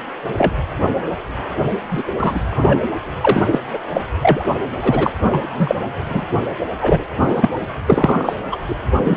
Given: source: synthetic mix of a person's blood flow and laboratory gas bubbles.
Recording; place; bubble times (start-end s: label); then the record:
Doppler ultrasound of blood flow; precordium
0.36-0.54 s: bubbles
1.91-2.04 s: bubbles
2.20-2.40 s: bubbles
2.51-2.81 s: bubbles
3.21-3.43 s: bubbles
3.51-3.59 s: bubbles
3.73-3.78 s: bubbles
3.93-4.02 s: bubbles
4.22-4.43 s: bubbles
4.80-5.12 s: bubbles
5.30-5.75 s: bubbles
6.09-6.25 s: bubbles
6.81-7.05 s: bubbles
7.19-7.49 s: bubbles
7.87-8.36 s: bubbles
8.51-8.58 s: bubbles
8.69-8.75 s: bubbles
9.04-9.17 s: bubbles
From the record:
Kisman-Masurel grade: 243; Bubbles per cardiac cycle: several, 3 to 8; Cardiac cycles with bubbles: 100%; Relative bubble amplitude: loud (0.450 to 0.775); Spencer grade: 3 (all of the cardiac periods contain showers or single bubble signals, but not dominating or overriding the cardiac motion signals); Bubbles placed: anywhere in the cardiac cycle